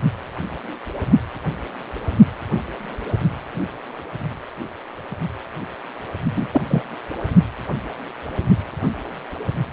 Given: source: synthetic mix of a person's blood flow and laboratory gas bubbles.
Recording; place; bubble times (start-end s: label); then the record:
Doppler ultrasound of blood flow; precordium
6.36-6.47 s: bubbles
6.51-6.62 s: bubbles
6.68-6.84 s: bubbles
From the record:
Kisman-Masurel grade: 213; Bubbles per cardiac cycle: several, 3 to 8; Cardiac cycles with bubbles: 1 to 10%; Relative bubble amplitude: loud (0.450 to 0.775); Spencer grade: 1 (occasional bubble signal discernible with the cardiac motion signal, with majority of cardiac periods free of bubbles); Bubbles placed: only in the low amplitude regions of the cardiac cycle